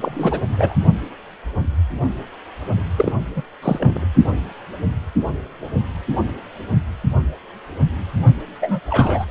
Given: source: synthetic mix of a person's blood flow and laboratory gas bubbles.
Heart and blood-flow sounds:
Doppler ultrasound of blood flow; precordium
0.00-0.40 s: bubbles
0.47-0.76 s: bubbles
2.97-3.13 s: bubbles
3.35-3.42 s: bubbles
3.62-4.05 s: bubbles
8.61-8.79 s: bubbles
8.90-9.26 s: bubbles
From the record:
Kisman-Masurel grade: 222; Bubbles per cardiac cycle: several, 3 to 8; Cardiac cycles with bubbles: 10 to 50%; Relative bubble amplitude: moderate (0.250 to 0.450); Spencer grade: 2 (many but less than half of the cardiac periods contain bubble signals, singularly or in groups); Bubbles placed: only in the low amplitude regions of the cardiac cycle

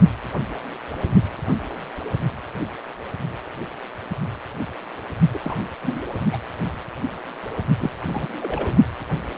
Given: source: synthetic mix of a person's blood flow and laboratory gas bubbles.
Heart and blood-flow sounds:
Doppler ultrasound of blood flow; precordium
5.33-5.38 s: bubbles
5.43-5.63 s: bubbles
5.83-6.01 s: bubbles
6.33-6.38 s: bubbles
7.80-7.90 s: bubbles
8.05-8.28 s: bubbles
8.40-8.75 s: bubbles
From the record:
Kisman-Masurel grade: 222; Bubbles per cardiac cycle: several, 3 to 8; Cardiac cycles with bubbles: 10 to 50%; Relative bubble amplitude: moderate (0.250 to 0.450); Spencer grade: 2 (many but less than half of the cardiac periods contain bubble signals, singularly or in groups); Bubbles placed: only in the low amplitude regions of the cardiac cycle

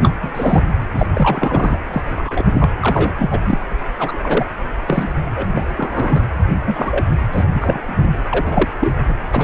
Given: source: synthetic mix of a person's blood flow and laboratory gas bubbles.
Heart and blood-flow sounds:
Doppler ultrasound of blood flow; precordium
0.02-0.15 s: bubbles
0.22-0.31 s: bubbles
0.34-0.62 s: bubbles
0.94-1.07 s: bubbles
1.14-1.79 s: bubbles
1.93-2.02 s: bubbles
2.16-2.50 s: bubbles
2.54-2.71 s: bubbles
2.80-3.12 s: bubbles
3.18-3.40 s: bubbles
3.44-3.58 s: bubbles
3.98-4.17 s: bubbles
4.22-4.45 s: bubbles
4.86-5.08 s: bubbles
5.36-5.46 s: bubbles
5.55-5.63 s: bubbles
5.76-6.24 s: bubbles
6.66-7.05 s: bubbles
7.32-7.45 s: bubbles
7.54-8.21 s: bubbles
8.31-8.68 s: bubbles
8.80-8.94 s: bubbles
9.08-9.14 s: bubbles
9.32-9.44 s: bubbles
From the record:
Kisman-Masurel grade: 243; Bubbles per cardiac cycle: several, 3 to 8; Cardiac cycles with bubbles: 100%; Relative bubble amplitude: loud (0.450 to 0.775); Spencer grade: 3 (all of the cardiac periods contain showers or single bubble signals, but not dominating or overriding the cardiac motion signals); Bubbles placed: anywhere in the cardiac cycle

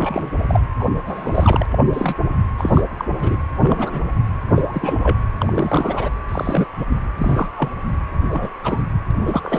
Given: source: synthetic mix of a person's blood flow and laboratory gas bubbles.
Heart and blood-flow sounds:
Doppler ultrasound of blood flow; precordium
0.00-0.31 s: bubbles
0.48-0.60 s: bubbles
0.79-0.84 s: bubbles
1.04-1.65 s: bubbles
1.71-1.84 s: bubbles
1.92-2.15 s: bubbles
2.57-2.82 s: bubbles
2.98-3.05 s: bubbles
3.19-3.36 s: bubbles
3.62-4.04 s: bubbles
4.55-4.62 s: bubbles
4.67-4.96 s: bubbles
5.03-5.18 s: bubbles
5.40-6.11 s: bubbles
6.29-6.70 s: bubbles
6.77-6.87 s: bubbles
7.18-7.49 s: bubbles
7.57-7.69 s: bubbles
8.29-8.50 s: bubbles
8.63-8.83 s: bubbles
9.11-9.13 s: bubbles
9.21-9.59 s: bubbles
From the record:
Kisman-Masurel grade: 242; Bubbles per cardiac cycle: several, 3 to 8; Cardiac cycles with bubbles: 100%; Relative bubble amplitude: moderate (0.250 to 0.450); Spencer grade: 3 (all of the cardiac periods contain showers or single bubble signals, but not dominating or overriding the cardiac motion signals); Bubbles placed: anywhere in the cardiac cycle

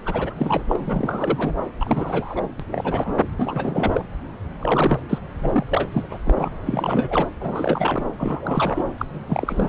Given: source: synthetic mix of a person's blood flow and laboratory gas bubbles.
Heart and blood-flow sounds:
Doppler ultrasound of blood flow; subclavian vein
0.05-0.34 s: bubbles
0.37-0.62 s: bubbles
0.68-1.55 s: bubbles
1.80-2.42 s: bubbles
2.59-2.64 s: bubbles
2.71-3.18 s: bubbles
3.37-4.03 s: bubbles
4.59-5.00 s: bubbles
5.09-5.18 s: bubbles
5.39-5.63 s: bubbles
5.65-6.07 s: bubbles
6.10-6.18 s: bubbles
6.25-6.51 s: bubbles
6.66-7.29 s: bubbles
7.40-8.04 s: bubbles
8.18-8.84 s: bubbles
8.98-9.06 s: bubbles
9.26-9.69 s: bubbles
From the record:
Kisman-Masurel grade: 343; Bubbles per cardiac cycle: rolling drumbeat, 9 or more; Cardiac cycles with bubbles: 100%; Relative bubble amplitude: loud (0.450 to 0.775); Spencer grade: 3 (all of the cardiac periods contain showers or single bubble signals, but not dominating or overriding the cardiac motion signals); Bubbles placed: anywhere in the cardiac cycle

